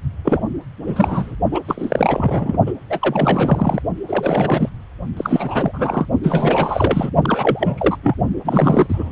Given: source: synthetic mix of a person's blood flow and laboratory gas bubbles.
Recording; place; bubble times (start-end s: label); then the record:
Doppler ultrasound of blood flow; precordium
0.24-0.42 s: bubbles
0.87-1.35 s: bubbles
1.51-2.58 s: bubbles
2.66-2.72 s: bubbles
2.90-3.82 s: bubbles
4.08-4.70 s: bubbles
5.17-6.06 s: bubbles
6.23-7.10 s: bubbles
7.22-7.97 s: bubbles
8.02-8.16 s: bubbles
8.44-9.12 s: bubbles
From the record:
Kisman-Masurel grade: 343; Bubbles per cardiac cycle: rolling drumbeat, 9 or more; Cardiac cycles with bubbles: 100%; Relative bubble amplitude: loud (0.450 to 0.775); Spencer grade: 3 (all of the cardiac periods contain showers or single bubble signals, but not dominating or overriding the cardiac motion signals); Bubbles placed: only in the low amplitude regions of the cardiac cycle